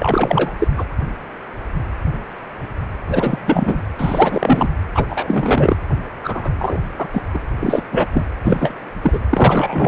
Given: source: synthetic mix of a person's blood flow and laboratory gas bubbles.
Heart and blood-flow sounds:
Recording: Doppler ultrasound of blood flow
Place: precordium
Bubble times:
0.00-0.52 s: bubbles
0.58-0.68 s: bubbles
0.77-0.84 s: bubbles
3.08-3.78 s: bubbles
3.99-4.67 s: bubbles
4.94-5.05 s: bubbles
5.09-5.76 s: bubbles
6.23-6.54 s: bubbles
6.58-6.78 s: bubbles
6.98-7.08 s: bubbles
7.13-7.22 s: bubbles
7.34-7.39 s: bubbles
7.60-7.82 s: bubbles
7.92-8.07 s: bubbles
8.12-8.25 s: bubbles
8.45-8.73 s: bubbles
9.03-9.19 s: bubbles
9.30-9.88 s: bubbles
From the record:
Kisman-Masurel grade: 333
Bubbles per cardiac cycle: rolling drumbeat, 9 or more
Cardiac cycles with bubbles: 50 to 99%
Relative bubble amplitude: loud (0.450 to 0.775)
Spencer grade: 3 (all of the cardiac periods contain showers or single bubble signals, but not dominating or overriding the cardiac motion signals)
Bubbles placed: anywhere in the cardiac cycle

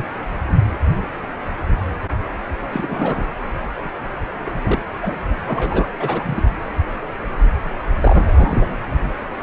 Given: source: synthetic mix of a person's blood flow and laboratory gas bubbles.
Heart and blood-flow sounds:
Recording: Doppler ultrasound of blood flow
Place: precordium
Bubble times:
0.00-0.04 s: bubbles
2.72-3.24 s: bubbles
4.46-4.51 s: bubbles
4.62-4.81 s: bubbles
5.02-5.19 s: bubbles
5.47-5.88 s: bubbles
6.00-6.48 s: bubbles
8.01-8.71 s: bubbles
From the record:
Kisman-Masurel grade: 232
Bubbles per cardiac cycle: several, 3 to 8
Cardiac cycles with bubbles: 50 to 99%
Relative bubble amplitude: moderate (0.250 to 0.450)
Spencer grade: 3 (all of the cardiac periods contain showers or single bubble signals, but not dominating or overriding the cardiac motion signals)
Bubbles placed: anywhere in the cardiac cycle

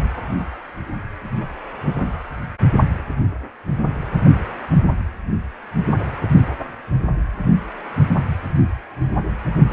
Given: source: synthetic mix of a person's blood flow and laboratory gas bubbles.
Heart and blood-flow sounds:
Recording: Doppler ultrasound of blood flow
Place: precordium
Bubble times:
no bubbles
From the record:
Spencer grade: 0 (complete lack of bubble signals)

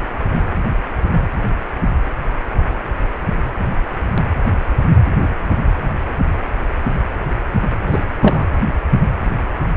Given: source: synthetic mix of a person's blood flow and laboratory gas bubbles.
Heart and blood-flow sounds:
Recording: Doppler ultrasound of blood flow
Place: precordium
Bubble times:
7.86-8.02 s: bubbles
8.21-8.45 s: bubbles
From the record:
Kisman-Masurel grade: 223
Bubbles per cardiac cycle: several, 3 to 8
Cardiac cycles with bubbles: 10 to 50%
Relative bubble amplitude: loud (0.450 to 0.775)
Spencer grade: 2 (many but less than half of the cardiac periods contain bubble signals, singularly or in groups)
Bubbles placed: anywhere in the cardiac cycle

